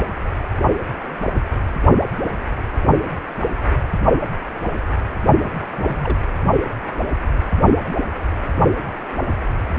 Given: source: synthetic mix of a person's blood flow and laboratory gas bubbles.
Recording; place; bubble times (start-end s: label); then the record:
Doppler ultrasound of blood flow; precordium
5.39-5.50 s: bubbles
5.72-6.18 s: bubbles
From the record:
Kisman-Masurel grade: 211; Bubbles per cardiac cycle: several, 3 to 8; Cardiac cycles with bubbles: 1 to 10%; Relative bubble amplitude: barely perceptible (0.100 to 0.250); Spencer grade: 1 (occasional bubble signal discernible with the cardiac motion signal, with majority of cardiac periods free of bubbles); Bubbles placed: only in the low amplitude regions of the cardiac cycle